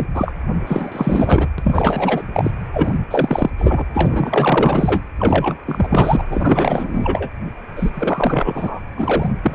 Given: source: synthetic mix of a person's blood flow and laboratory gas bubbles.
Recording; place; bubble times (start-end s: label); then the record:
Doppler ultrasound of blood flow; precordium
0.00-0.07 s: bubbles
0.14-0.33 s: bubbles
0.67-1.49 s: bubbles
1.58-2.23 s: bubbles
2.33-2.51 s: bubbles
2.74-2.98 s: bubbles
3.10-3.51 s: bubbles
3.58-3.85 s: bubbles
3.94-5.03 s: bubbles
5.19-5.58 s: bubbles
5.67-6.26 s: bubbles
6.30-7.29 s: bubbles
7.76-7.91 s: bubbles
7.94-8.80 s: bubbles
8.96-9.34 s: bubbles
9.42-9.55 s: bubbles
From the record:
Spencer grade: 4 (maximum detectable bubble signal sounding continuously throughout systole and diastole of every cardiac period, and overriding the amplitude of the normal cardiac signals); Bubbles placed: anywhere in the cardiac cycle